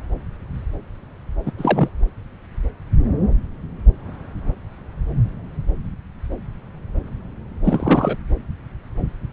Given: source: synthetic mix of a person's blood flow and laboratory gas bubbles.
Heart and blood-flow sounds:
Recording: Doppler ultrasound of blood flow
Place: subclavian vein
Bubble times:
1.45-1.52 s: bubbles
1.58-1.88 s: bubbles
7.63-8.17 s: bubbles
From the record:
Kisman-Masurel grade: 213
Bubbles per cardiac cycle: several, 3 to 8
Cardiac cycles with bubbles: 1 to 10%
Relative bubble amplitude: loud (0.450 to 0.775)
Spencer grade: 1 (occasional bubble signal discernible with the cardiac motion signal, with majority of cardiac periods free of bubbles)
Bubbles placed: anywhere in the cardiac cycle

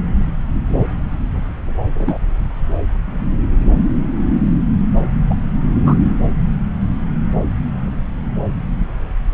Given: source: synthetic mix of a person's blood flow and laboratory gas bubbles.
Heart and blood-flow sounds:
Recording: Doppler ultrasound of blood flow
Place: subclavian vein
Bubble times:
1.99-2.19 s: bubbles
5.29-5.35 s: bubbles
5.86-5.95 s: bubbles
From the record:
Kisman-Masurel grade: 123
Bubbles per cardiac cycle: 1 to 2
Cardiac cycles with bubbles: 10 to 50%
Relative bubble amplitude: loud (0.450 to 0.775)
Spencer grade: 2 (many but less than half of the cardiac periods contain bubble signals, singularly or in groups)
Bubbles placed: anywhere in the cardiac cycle

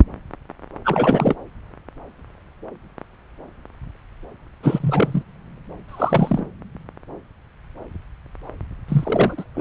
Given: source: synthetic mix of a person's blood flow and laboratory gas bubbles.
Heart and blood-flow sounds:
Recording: Doppler ultrasound of blood flow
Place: subclavian vein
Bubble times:
0.84-1.35 s: bubbles
4.62-5.23 s: bubbles
5.88-6.46 s: bubbles
8.88-9.44 s: bubbles
9.54-9.61 s: bubbles
From the record:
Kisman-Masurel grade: 222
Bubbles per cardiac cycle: several, 3 to 8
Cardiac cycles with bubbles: 10 to 50%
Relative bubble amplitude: moderate (0.250 to 0.450)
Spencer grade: 2 (many but less than half of the cardiac periods contain bubble signals, singularly or in groups)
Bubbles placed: anywhere in the cardiac cycle

